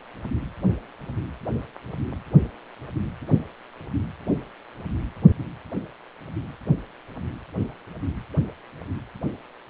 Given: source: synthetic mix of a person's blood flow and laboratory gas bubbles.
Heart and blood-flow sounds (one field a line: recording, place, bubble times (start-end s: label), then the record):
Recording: Doppler ultrasound of blood flow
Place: precordium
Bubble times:
no bubbles
From the record:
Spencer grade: 0 (complete lack of bubble signals)